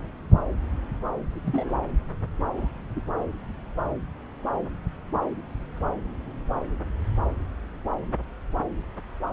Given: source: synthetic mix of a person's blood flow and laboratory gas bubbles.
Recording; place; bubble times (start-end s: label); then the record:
Doppler ultrasound of blood flow; subclavian vein
1.30-1.76 s: bubbles
2.57-2.69 s: bubbles
2.96-3.01 s: bubbles
From the record:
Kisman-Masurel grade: 122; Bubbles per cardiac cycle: 1 to 2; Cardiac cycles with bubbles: 10 to 50%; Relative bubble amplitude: moderate (0.250 to 0.450); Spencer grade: 2 (many but less than half of the cardiac periods contain bubble signals, singularly or in groups); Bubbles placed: anywhere in the cardiac cycle